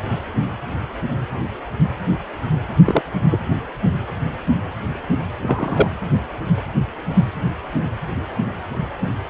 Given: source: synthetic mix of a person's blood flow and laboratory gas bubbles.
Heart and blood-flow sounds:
Doppler ultrasound of blood flow; precordium
2.84-3.02 s: bubbles
3.30-3.40 s: bubbles
5.42-5.87 s: bubbles
From the record:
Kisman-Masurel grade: 123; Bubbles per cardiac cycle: 1 to 2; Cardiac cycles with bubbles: 10 to 50%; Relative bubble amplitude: loud (0.450 to 0.775); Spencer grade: 2 (many but less than half of the cardiac periods contain bubble signals, singularly or in groups); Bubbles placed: only in the low amplitude regions of the cardiac cycle

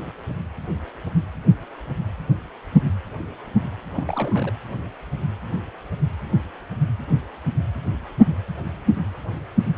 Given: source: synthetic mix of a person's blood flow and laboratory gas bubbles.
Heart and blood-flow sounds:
Doppler ultrasound of blood flow; precordium
3.81-4.53 s: bubbles
From the record:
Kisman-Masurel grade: 211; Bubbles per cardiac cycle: several, 3 to 8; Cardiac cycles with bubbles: 1 to 10%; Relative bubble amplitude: barely perceptible (0.100 to 0.250); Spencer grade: 1 (occasional bubble signal discernible with the cardiac motion signal, with majority of cardiac periods free of bubbles); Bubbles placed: anywhere in the cardiac cycle

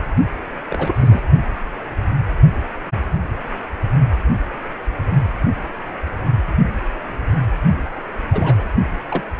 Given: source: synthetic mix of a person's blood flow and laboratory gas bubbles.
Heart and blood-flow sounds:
Doppler ultrasound of blood flow; precordium
0.70-1.22 s: bubbles
8.32-8.69 s: bubbles
9.10-9.23 s: bubbles
From the record:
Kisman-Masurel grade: 232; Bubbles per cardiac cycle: several, 3 to 8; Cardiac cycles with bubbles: 50 to 99%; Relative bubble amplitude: moderate (0.250 to 0.450); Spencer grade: 3 (all of the cardiac periods contain showers or single bubble signals, but not dominating or overriding the cardiac motion signals); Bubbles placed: only in the low amplitude regions of the cardiac cycle

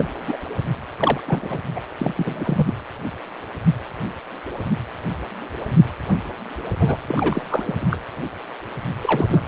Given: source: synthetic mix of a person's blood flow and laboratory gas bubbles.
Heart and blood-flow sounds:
Doppler ultrasound of blood flow; precordium
0.00-0.10 s: bubbles
0.27-0.37 s: bubbles
0.97-1.21 s: bubbles
1.26-1.58 s: bubbles
1.75-1.80 s: bubbles
1.98-2.13 s: bubbles
2.17-2.75 s: bubbles
6.79-6.98 s: bubbles
7.08-7.43 s: bubbles
7.47-7.88 s: bubbles
7.91-7.97 s: bubbles
9.03-9.43 s: bubbles
From the record:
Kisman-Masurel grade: 232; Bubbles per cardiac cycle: several, 3 to 8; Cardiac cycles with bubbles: 50 to 99%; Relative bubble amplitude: moderate (0.250 to 0.450); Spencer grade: 3 (all of the cardiac periods contain showers or single bubble signals, but not dominating or overriding the cardiac motion signals); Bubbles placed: anywhere in the cardiac cycle

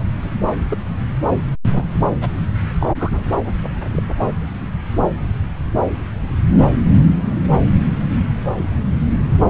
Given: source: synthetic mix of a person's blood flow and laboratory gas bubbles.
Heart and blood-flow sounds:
Doppler ultrasound of blood flow; subclavian vein
0.70-0.77 s: bubbles
1.70-1.89 s: bubbles
2.21-2.28 s: bubbles
2.80-2.93 s: bubbles
2.98-3.27 s: bubbles
3.44-3.55 s: bubbles
3.86-4.02 s: bubbles
4.19-4.26 s: bubbles
From the record:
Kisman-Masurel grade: 222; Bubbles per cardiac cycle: several, 3 to 8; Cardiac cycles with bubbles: 10 to 50%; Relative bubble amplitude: moderate (0.250 to 0.450); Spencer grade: 2 (many but less than half of the cardiac periods contain bubble signals, singularly or in groups); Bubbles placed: anywhere in the cardiac cycle

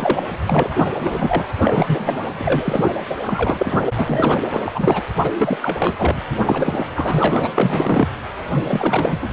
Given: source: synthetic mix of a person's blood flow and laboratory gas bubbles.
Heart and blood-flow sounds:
Doppler ultrasound of blood flow; precordium
0.00-0.23 s: bubbles
0.29-0.37 s: bubbles
0.45-0.90 s: bubbles
0.98-1.45 s: bubbles
1.64-2.28 s: bubbles
2.37-2.92 s: bubbles
3.22-3.81 s: bubbles
3.95-4.38 s: bubbles
4.52-4.60 s: bubbles
4.64-5.04 s: bubbles
5.23-5.30 s: bubbles
5.38-5.57 s: bubbles
5.62-5.79 s: bubbles
5.81-5.96 s: bubbles
5.98-6.21 s: bubbles
6.44-6.90 s: bubbles
6.94-7.50 s: bubbles
7.54-8.09 s: bubbles
8.52-9.33 s: bubbles
From the record:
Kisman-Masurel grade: 343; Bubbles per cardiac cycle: rolling drumbeat, 9 or more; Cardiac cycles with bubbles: 100%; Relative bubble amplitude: loud (0.450 to 0.775); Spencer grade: 3 (all of the cardiac periods contain showers or single bubble signals, but not dominating or overriding the cardiac motion signals); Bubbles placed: anywhere in the cardiac cycle

